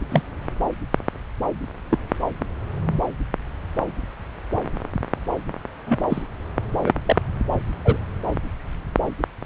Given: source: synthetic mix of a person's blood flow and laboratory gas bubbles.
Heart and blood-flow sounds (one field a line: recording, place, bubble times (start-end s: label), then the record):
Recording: Doppler ultrasound of blood flow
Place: subclavian vein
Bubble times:
0.11-0.22 s: bubbles
1.90-1.99 s: bubbles
5.86-6.07 s: bubbles
6.09-6.22 s: bubbles
6.84-6.92 s: bubbles
7.05-7.17 s: bubbles
7.85-7.97 s: bubbles
From the record:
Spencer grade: 2 (many but less than half of the cardiac periods contain bubble signals, singularly or in groups)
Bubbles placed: anywhere in the cardiac cycle